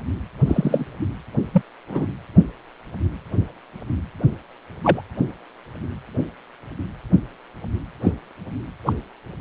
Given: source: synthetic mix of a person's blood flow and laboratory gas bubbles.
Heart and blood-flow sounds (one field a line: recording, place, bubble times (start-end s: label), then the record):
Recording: Doppler ultrasound of blood flow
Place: precordium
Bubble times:
0.46-0.85 s: bubbles
1.53-1.62 s: bubbles
1.89-2.06 s: bubbles
4.83-5.01 s: bubbles
8.03-8.12 s: bubbles
8.86-8.93 s: bubbles
From the record:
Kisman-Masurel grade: 123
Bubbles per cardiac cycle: 1 to 2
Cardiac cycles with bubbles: 10 to 50%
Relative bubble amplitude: loud (0.450 to 0.775)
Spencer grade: 2 (many but less than half of the cardiac periods contain bubble signals, singularly or in groups)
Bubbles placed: anywhere in the cardiac cycle